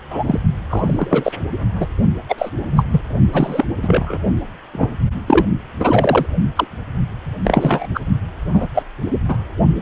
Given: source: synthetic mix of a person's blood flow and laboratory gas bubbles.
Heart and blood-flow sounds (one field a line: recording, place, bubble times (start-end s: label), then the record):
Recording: Doppler ultrasound of blood flow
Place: precordium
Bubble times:
0.10-0.23 s: bubbles
0.27-0.40 s: bubbles
0.70-1.32 s: bubbles
1.80-1.86 s: bubbles
2.29-2.35 s: bubbles
2.38-2.50 s: bubbles
2.77-2.85 s: bubbles
2.90-3.01 s: bubbles
3.32-3.65 s: bubbles
3.82-4.19 s: bubbles
4.73-4.88 s: bubbles
5.26-5.45 s: bubbles
5.80-6.26 s: bubbles
6.56-6.68 s: bubbles
7.44-7.87 s: bubbles
7.94-8.00 s: bubbles
8.54-8.68 s: bubbles
8.74-8.83 s: bubbles
9.28-9.37 s: bubbles
From the record:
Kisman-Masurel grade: 243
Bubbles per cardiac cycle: several, 3 to 8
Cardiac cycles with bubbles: 100%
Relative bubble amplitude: loud (0.450 to 0.775)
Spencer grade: 3 (all of the cardiac periods contain showers or single bubble signals, but not dominating or overriding the cardiac motion signals)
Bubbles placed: only in the low amplitude regions of the cardiac cycle